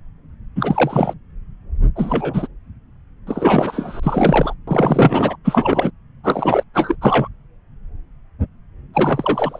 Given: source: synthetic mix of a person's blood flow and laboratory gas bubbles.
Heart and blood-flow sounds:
Doppler ultrasound of blood flow; subclavian vein
0.55-1.13 s: bubbles
1.96-2.48 s: bubbles
3.27-4.00 s: bubbles
4.03-4.54 s: bubbles
4.67-5.36 s: bubbles
5.44-5.91 s: bubbles
6.24-6.64 s: bubbles
6.74-6.96 s: bubbles
7.01-7.28 s: bubbles
8.93-9.60 s: bubbles
From the record:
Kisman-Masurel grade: 333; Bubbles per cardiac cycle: rolling drumbeat, 9 or more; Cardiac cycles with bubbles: 50 to 99%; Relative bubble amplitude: loud (0.450 to 0.775); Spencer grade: 3 (all of the cardiac periods contain showers or single bubble signals, but not dominating or overriding the cardiac motion signals); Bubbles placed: anywhere in the cardiac cycle

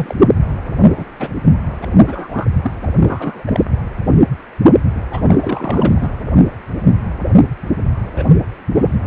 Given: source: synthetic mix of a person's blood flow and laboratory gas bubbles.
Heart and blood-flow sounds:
Doppler ultrasound of blood flow; precordium
0.00-0.16 s: bubbles
0.19-0.30 s: bubbles
0.82-1.06 s: bubbles
1.19-1.28 s: bubbles
1.81-1.87 s: bubbles
2.06-2.46 s: bubbles
2.62-2.72 s: bubbles
2.83-2.87 s: bubbles
2.94-3.44 s: bubbles
3.47-3.65 s: bubbles
5.11-6.09 s: bubbles
8.15-8.24 s: bubbles
8.74-8.90 s: bubbles
From the record:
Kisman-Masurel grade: 232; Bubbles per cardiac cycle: several, 3 to 8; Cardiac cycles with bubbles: 50 to 99%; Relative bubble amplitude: moderate (0.250 to 0.450); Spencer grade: 3 (all of the cardiac periods contain showers or single bubble signals, but not dominating or overriding the cardiac motion signals); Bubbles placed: anywhere in the cardiac cycle

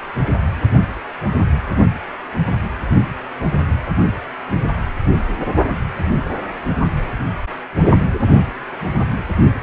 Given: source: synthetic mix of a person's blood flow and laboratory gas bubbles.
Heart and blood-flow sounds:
Doppler ultrasound of blood flow; precordium
no bubbles
From the record:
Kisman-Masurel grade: 000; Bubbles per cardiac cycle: 0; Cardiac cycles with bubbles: 0%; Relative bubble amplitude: no bubbles discernible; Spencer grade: 0 (complete lack of bubble signals)

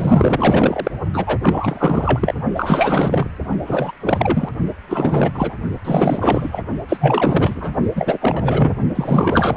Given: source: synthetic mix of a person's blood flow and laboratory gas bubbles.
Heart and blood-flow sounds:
Doppler ultrasound of blood flow; precordium
0.00-0.91 s: bubbles
1.13-1.38 s: bubbles
1.42-2.34 s: bubbles
2.55-3.28 s: bubbles
3.65-3.92 s: bubbles
4.00-4.49 s: bubbles
4.88-5.31 s: bubbles
5.33-5.54 s: bubbles
5.85-6.62 s: bubbles
6.89-7.74 s: bubbles
7.95-8.19 s: bubbles
8.21-8.73 s: bubbles
8.95-9.57 s: bubbles
From the record:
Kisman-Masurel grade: 444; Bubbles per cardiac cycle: continuous sound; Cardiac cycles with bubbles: 100%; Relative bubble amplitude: maximal (0.775 to 0.999); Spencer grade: 4 (maximum detectable bubble signal sounding continuously throughout systole and diastole of every cardiac period, and overriding the amplitude of the normal cardiac signals); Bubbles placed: only in the low amplitude regions of the cardiac cycle

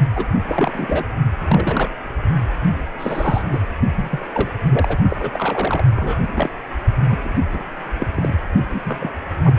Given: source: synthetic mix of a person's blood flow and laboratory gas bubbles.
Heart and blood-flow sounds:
Doppler ultrasound of blood flow; precordium
0.15-0.26 s: bubbles
0.48-1.06 s: bubbles
1.45-1.91 s: bubbles
2.99-3.43 s: bubbles
3.51-3.59 s: bubbles
3.95-4.28 s: bubbles
4.33-4.51 s: bubbles
4.70-4.97 s: bubbles
5.09-5.17 s: bubbles
5.19-5.84 s: bubbles
5.96-6.26 s: bubbles
6.33-6.50 s: bubbles
7.06-7.43 s: bubbles
7.53-7.63 s: bubbles
7.98-8.07 s: bubbles
8.15-8.36 s: bubbles
8.70-8.81 s: bubbles
8.84-9.12 s: bubbles
9.44-9.56 s: bubbles
From the record:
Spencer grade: 3 (all of the cardiac periods contain showers or single bubble signals, but not dominating or overriding the cardiac motion signals); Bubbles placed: only in the low amplitude regions of the cardiac cycle

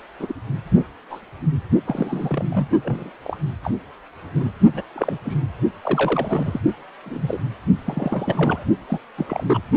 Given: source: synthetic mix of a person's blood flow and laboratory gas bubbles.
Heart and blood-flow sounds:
Doppler ultrasound of blood flow; precordium
0.20-0.34 s: bubbles
0.74-0.85 s: bubbles
1.10-1.20 s: bubbles
1.84-2.68 s: bubbles
2.83-3.10 s: bubbles
3.25-3.37 s: bubbles
3.63-3.71 s: bubbles
4.35-4.50 s: bubbles
4.74-4.83 s: bubbles
4.96-5.18 s: bubbles
5.25-5.38 s: bubbles
5.82-6.58 s: bubbles
7.05-7.40 s: bubbles
7.84-8.65 s: bubbles
8.88-8.99 s: bubbles
9.18-9.44 s: bubbles
9.46-9.61 s: bubbles
From the record:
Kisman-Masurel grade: 232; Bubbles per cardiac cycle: several, 3 to 8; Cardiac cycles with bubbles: 50 to 99%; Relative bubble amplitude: moderate (0.250 to 0.450); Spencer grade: 3 (all of the cardiac periods contain showers or single bubble signals, but not dominating or overriding the cardiac motion signals); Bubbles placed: only in the low amplitude regions of the cardiac cycle

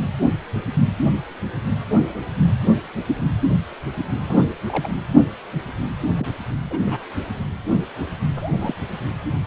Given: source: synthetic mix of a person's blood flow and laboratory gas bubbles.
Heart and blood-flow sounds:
Doppler ultrasound of blood flow; precordium
4.28-4.41 s: bubbles
4.69-4.89 s: bubbles
6.19-6.32 s: bubbles
6.70-6.79 s: bubbles
6.86-7.03 s: bubbles
8.36-8.75 s: bubbles
From the record:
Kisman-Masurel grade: 121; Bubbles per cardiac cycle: 1 to 2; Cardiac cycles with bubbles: 10 to 50%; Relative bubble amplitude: barely perceptible (0.100 to 0.250); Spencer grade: 2 (many but less than half of the cardiac periods contain bubble signals, singularly or in groups); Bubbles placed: anywhere in the cardiac cycle

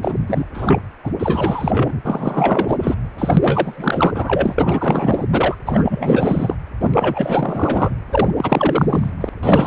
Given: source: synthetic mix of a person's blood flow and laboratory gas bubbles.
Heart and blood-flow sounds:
Doppler ultrasound of blood flow; precordium
0.01-0.15 s: bubbles
0.27-0.45 s: bubbles
0.54-0.79 s: bubbles
1.03-1.11 s: bubbles
1.19-2.00 s: bubbles
2.05-2.95 s: bubbles
3.18-4.12 s: bubbles
4.14-4.55 s: bubbles
4.58-5.27 s: bubbles
5.31-5.55 s: bubbles
5.66-6.55 s: bubbles
6.80-7.94 s: bubbles
8.11-8.30 s: bubbles
8.37-9.11 s: bubbles
9.21-9.29 s: bubbles
9.43-9.67 s: bubbles
From the record:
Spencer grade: 4 (maximum detectable bubble signal sounding continuously throughout systole and diastole of every cardiac period, and overriding the amplitude of the normal cardiac signals); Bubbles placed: anywhere in the cardiac cycle

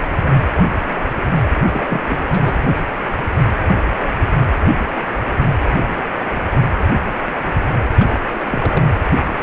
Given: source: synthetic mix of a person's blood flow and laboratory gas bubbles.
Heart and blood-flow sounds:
Doppler ultrasound of blood flow; precordium
1.68-1.86 s: bubbles
1.89-2.01 s: bubbles
2.06-2.23 s: bubbles
2.30-2.54 s: bubbles
7.97-8.19 s: bubbles
8.35-8.90 s: bubbles
From the record:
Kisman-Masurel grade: 222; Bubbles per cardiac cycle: several, 3 to 8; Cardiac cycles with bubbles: 10 to 50%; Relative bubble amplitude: moderate (0.250 to 0.450); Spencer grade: 2 (many but less than half of the cardiac periods contain bubble signals, singularly or in groups); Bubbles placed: anywhere in the cardiac cycle

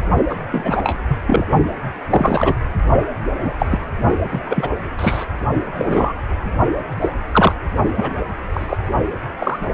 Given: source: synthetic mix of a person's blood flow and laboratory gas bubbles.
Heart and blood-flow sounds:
Doppler ultrasound of blood flow; precordium
0.29-0.35 s: bubbles
0.52-0.99 s: bubbles
1.08-1.16 s: bubbles
1.26-1.45 s: bubbles
2.10-2.55 s: bubbles
3.37-3.53 s: bubbles
3.59-3.66 s: bubbles
3.69-3.79 s: bubbles
4.30-4.41 s: bubbles
4.50-4.70 s: bubbles
4.98-5.25 s: bubbles
5.77-6.14 s: bubbles
7.01-7.09 s: bubbles
7.32-7.53 s: bubbles
7.97-8.12 s: bubbles
8.53-8.77 s: bubbles
9.39-9.59 s: bubbles
From the record:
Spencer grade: 3 (all of the cardiac periods contain showers or single bubble signals, but not dominating or overriding the cardiac motion signals); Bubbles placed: only in the low amplitude regions of the cardiac cycle

